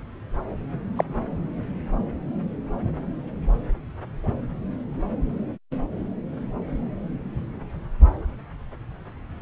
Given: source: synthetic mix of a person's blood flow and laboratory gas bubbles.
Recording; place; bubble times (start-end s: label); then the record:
Doppler ultrasound of blood flow; subclavian vein
0.95-1.04 s: bubbles
From the record:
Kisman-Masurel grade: 112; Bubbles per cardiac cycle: 1 to 2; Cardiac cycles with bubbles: 1 to 10%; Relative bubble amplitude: moderate (0.250 to 0.450); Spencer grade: 1 (occasional bubble signal discernible with the cardiac motion signal, with majority of cardiac periods free of bubbles); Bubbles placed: anywhere in the cardiac cycle